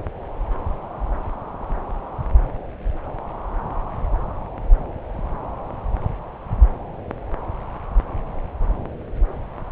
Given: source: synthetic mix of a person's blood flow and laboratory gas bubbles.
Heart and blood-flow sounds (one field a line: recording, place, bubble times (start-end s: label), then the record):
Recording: Doppler ultrasound of blood flow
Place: subclavian vein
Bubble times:
no bubbles
From the record:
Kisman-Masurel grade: 000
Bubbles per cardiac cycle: 0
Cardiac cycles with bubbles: 0%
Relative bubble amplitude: no bubbles discernible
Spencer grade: 0 (complete lack of bubble signals)